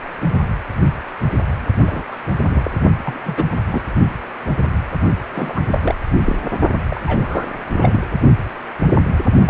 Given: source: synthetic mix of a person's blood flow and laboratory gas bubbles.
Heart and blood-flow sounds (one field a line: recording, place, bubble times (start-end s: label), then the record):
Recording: Doppler ultrasound of blood flow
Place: precordium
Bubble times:
0.00-0.15 s: bubbles
1.86-2.02 s: bubbles
2.11-2.15 s: bubbles
2.49-2.71 s: bubbles
3.04-3.44 s: bubbles
3.71-3.81 s: bubbles
5.33-5.62 s: bubbles
5.70-5.95 s: bubbles
6.26-6.36 s: bubbles
6.90-7.47 s: bubbles
7.76-8.03 s: bubbles
9.46-9.49 s: bubbles
From the record:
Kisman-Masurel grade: 232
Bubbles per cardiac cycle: several, 3 to 8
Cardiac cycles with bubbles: 50 to 99%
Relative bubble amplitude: moderate (0.250 to 0.450)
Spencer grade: 3 (all of the cardiac periods contain showers or single bubble signals, but not dominating or overriding the cardiac motion signals)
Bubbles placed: only in the low amplitude regions of the cardiac cycle